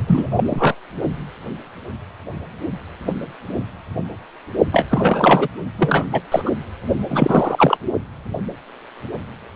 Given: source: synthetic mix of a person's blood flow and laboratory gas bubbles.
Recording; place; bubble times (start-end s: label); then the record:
Doppler ultrasound of blood flow; precordium
0.07-0.27 s: bubbles
0.32-0.75 s: bubbles
4.71-4.86 s: bubbles
4.90-5.48 s: bubbles
5.78-6.04 s: bubbles
6.12-6.21 s: bubbles
6.32-6.51 s: bubbles
7.09-7.77 s: bubbles
From the record:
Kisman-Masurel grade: 223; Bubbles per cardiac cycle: several, 3 to 8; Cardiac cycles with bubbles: 10 to 50%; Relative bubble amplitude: loud (0.450 to 0.775); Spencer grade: 2 (many but less than half of the cardiac periods contain bubble signals, singularly or in groups); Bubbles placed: only in the low amplitude regions of the cardiac cycle